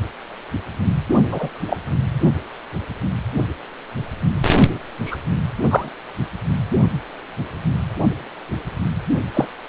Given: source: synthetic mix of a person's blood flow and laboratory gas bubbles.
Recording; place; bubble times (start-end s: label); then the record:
Doppler ultrasound of blood flow; precordium
1.31-1.50 s: bubbles
1.66-1.77 s: bubbles
5.05-5.16 s: bubbles
5.59-5.89 s: bubbles
9.33-9.46 s: bubbles
From the record:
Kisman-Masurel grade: 123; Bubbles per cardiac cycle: 1 to 2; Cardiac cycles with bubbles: 10 to 50%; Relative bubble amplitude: loud (0.450 to 0.775); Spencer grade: 2 (many but less than half of the cardiac periods contain bubble signals, singularly or in groups); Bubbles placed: only in the low amplitude regions of the cardiac cycle